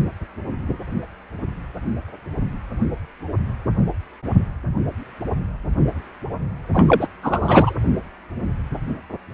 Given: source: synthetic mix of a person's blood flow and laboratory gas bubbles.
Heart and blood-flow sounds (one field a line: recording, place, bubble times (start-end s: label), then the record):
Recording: Doppler ultrasound of blood flow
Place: precordium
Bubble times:
6.73-7.08 s: bubbles
7.22-7.74 s: bubbles
From the record:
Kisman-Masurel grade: 213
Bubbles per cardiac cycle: several, 3 to 8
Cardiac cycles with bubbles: 1 to 10%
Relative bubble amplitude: loud (0.450 to 0.775)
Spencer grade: 1 (occasional bubble signal discernible with the cardiac motion signal, with majority of cardiac periods free of bubbles)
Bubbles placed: anywhere in the cardiac cycle